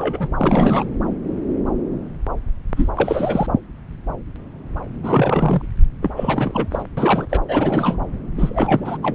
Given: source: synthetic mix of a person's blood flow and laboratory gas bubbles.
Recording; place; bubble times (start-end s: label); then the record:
Doppler ultrasound of blood flow; subclavian vein
0.00-0.29 s: bubbles
0.37-0.84 s: bubbles
2.76-2.89 s: bubbles
2.95-3.46 s: bubbles
5.03-5.62 s: bubbles
6.02-6.10 s: bubbles
6.16-6.67 s: bubbles
6.71-6.83 s: bubbles
6.97-7.26 s: bubbles
7.29-7.41 s: bubbles
7.48-7.98 s: bubbles
8.37-8.97 s: bubbles
9.03-9.14 s: bubbles
From the record:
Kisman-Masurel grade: 332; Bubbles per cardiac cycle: rolling drumbeat, 9 or more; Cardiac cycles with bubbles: 50 to 99%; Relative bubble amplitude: moderate (0.250 to 0.450); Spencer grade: 3 (all of the cardiac periods contain showers or single bubble signals, but not dominating or overriding the cardiac motion signals); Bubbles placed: anywhere in the cardiac cycle